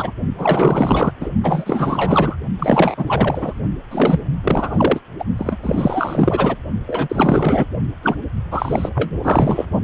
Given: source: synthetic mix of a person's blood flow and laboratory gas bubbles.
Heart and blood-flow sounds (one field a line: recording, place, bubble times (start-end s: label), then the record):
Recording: Doppler ultrasound of blood flow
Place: precordium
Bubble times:
0.00-0.11 s: bubbles
0.38-1.12 s: bubbles
1.20-1.29 s: bubbles
1.43-2.38 s: bubbles
2.58-3.59 s: bubbles
3.91-4.20 s: bubbles
4.43-5.00 s: bubbles
5.18-5.24 s: bubbles
5.38-5.57 s: bubbles
5.62-6.56 s: bubbles
6.87-7.67 s: bubbles
8.03-8.15 s: bubbles
8.51-8.89 s: bubbles
8.95-9.11 s: bubbles
9.23-9.66 s: bubbles
From the record:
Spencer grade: 4 (maximum detectable bubble signal sounding continuously throughout systole and diastole of every cardiac period, and overriding the amplitude of the normal cardiac signals)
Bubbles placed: only in the low amplitude regions of the cardiac cycle